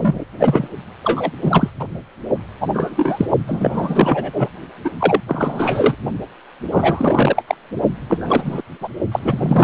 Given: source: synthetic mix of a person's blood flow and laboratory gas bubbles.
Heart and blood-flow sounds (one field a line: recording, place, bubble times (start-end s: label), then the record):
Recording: Doppler ultrasound of blood flow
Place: precordium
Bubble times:
0.00-0.24 s: bubbles
0.39-0.68 s: bubbles
1.03-1.30 s: bubbles
1.41-1.70 s: bubbles
1.79-1.84 s: bubbles
2.60-2.68 s: bubbles
2.73-3.26 s: bubbles
3.47-4.30 s: bubbles
4.33-4.49 s: bubbles
4.84-4.90 s: bubbles
4.99-5.21 s: bubbles
5.28-5.95 s: bubbles
6.71-7.43 s: bubbles
7.47-7.55 s: bubbles
8.08-8.62 s: bubbles
8.80-8.88 s: bubbles
9.12-9.64 s: bubbles
From the record:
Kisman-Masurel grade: 243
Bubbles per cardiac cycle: several, 3 to 8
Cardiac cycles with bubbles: 100%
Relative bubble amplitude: loud (0.450 to 0.775)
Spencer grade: 3 (all of the cardiac periods contain showers or single bubble signals, but not dominating or overriding the cardiac motion signals)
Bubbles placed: only in the low amplitude regions of the cardiac cycle